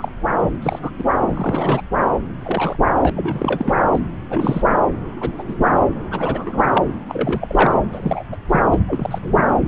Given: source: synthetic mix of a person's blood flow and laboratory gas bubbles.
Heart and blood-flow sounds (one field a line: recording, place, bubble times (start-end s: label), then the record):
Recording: Doppler ultrasound of blood flow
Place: subclavian vein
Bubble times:
0.00-0.11 s: bubbles
0.62-0.90 s: bubbles
0.98-1.04 s: bubbles
1.29-1.81 s: bubbles
2.39-2.75 s: bubbles
2.98-3.10 s: bubbles
3.16-3.75 s: bubbles
3.92-4.00 s: bubbles
4.30-4.62 s: bubbles
5.21-5.31 s: bubbles
5.38-5.43 s: bubbles
5.47-5.55 s: bubbles
6.11-6.63 s: bubbles
6.75-6.83 s: bubbles
7.08-7.77 s: bubbles
7.92-8.23 s: bubbles
8.32-8.37 s: bubbles
8.49-8.61 s: bubbles
8.71-8.79 s: bubbles
8.88-9.19 s: bubbles
9.23-9.43 s: bubbles
From the record:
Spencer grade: 3 (all of the cardiac periods contain showers or single bubble signals, but not dominating or overriding the cardiac motion signals)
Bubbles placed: anywhere in the cardiac cycle